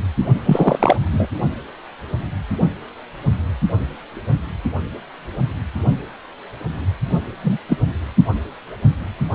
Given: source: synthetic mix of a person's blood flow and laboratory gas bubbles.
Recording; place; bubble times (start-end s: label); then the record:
Doppler ultrasound of blood flow; precordium
0.38-0.96 s: bubbles
1.11-1.27 s: bubbles
7.43-7.58 s: bubbles
7.69-7.77 s: bubbles
From the record:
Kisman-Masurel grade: 223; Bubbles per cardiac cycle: several, 3 to 8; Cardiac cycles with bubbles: 10 to 50%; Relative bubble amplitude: loud (0.450 to 0.775); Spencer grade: 2 (many but less than half of the cardiac periods contain bubble signals, singularly or in groups); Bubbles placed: only in the low amplitude regions of the cardiac cycle